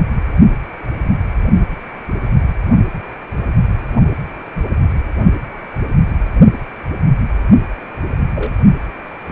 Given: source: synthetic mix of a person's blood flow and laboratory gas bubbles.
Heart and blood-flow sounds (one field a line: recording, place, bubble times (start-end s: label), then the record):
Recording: Doppler ultrasound of blood flow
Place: precordium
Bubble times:
8.35-8.53 s: bubbles
From the record:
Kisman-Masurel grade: 122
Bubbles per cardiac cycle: 1 to 2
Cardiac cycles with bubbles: 10 to 50%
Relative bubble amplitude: moderate (0.250 to 0.450)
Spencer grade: 2 (many but less than half of the cardiac periods contain bubble signals, singularly or in groups)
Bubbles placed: only in the low amplitude regions of the cardiac cycle